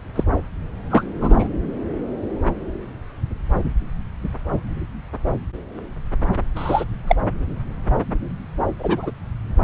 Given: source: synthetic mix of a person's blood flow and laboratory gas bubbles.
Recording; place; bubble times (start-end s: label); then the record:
Doppler ultrasound of blood flow; subclavian vein
0.15-0.23 s: bubbles
0.90-1.03 s: bubbles
1.21-1.48 s: bubbles
6.56-6.84 s: bubbles
7.07-7.16 s: bubbles
8.79-9.11 s: bubbles
From the record:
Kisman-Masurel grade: 123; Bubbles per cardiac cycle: 1 to 2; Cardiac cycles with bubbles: 10 to 50%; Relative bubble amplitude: loud (0.450 to 0.775); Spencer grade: 2 (many but less than half of the cardiac periods contain bubble signals, singularly or in groups); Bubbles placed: anywhere in the cardiac cycle